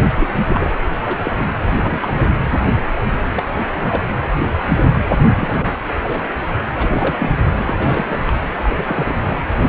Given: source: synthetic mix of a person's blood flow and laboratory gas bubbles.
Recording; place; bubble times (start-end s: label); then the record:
Doppler ultrasound of blood flow; precordium
0.15-0.40 s: bubbles
0.46-0.74 s: bubbles
1.02-1.31 s: bubbles
1.37-1.53 s: bubbles
1.82-2.44 s: bubbles
3.34-3.44 s: bubbles
3.58-4.03 s: bubbles
4.76-4.99 s: bubbles
5.10-5.17 s: bubbles
5.35-5.79 s: bubbles
6.03-6.22 s: bubbles
6.73-7.29 s: bubbles
7.58-7.75 s: bubbles
7.79-8.17 s: bubbles
8.27-8.34 s: bubbles
8.62-9.17 s: bubbles
9.60-9.69 s: bubbles
From the record:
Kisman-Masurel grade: 242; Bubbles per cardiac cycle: several, 3 to 8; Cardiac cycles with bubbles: 100%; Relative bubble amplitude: moderate (0.250 to 0.450); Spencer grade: 3 (all of the cardiac periods contain showers or single bubble signals, but not dominating or overriding the cardiac motion signals); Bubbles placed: anywhere in the cardiac cycle